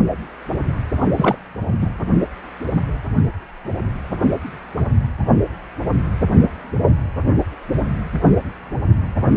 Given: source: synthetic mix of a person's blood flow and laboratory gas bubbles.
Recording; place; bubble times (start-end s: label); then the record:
Doppler ultrasound of blood flow; precordium
1.17-1.35 s: bubbles
1.81-1.87 s: bubbles
From the record:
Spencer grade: 1 (occasional bubble signal discernible with the cardiac motion signal, with majority of cardiac periods free of bubbles); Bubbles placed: only in the low amplitude regions of the cardiac cycle